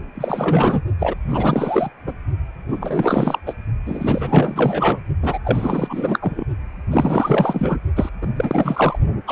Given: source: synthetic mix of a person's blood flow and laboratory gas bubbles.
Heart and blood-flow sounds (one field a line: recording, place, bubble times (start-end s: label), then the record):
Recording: Doppler ultrasound of blood flow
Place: precordium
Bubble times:
0.15-0.82 s: bubbles
0.99-1.15 s: bubbles
1.29-1.90 s: bubbles
2.06-2.12 s: bubbles
2.69-3.39 s: bubbles
3.46-3.54 s: bubbles
3.85-5.01 s: bubbles
5.22-5.38 s: bubbles
5.44-6.45 s: bubbles
6.91-7.81 s: bubbles
7.96-8.09 s: bubbles
8.21-8.28 s: bubbles
8.36-8.99 s: bubbles
9.27-9.32 s: bubbles
From the record:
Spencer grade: 4 (maximum detectable bubble signal sounding continuously throughout systole and diastole of every cardiac period, and overriding the amplitude of the normal cardiac signals)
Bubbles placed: only in the low amplitude regions of the cardiac cycle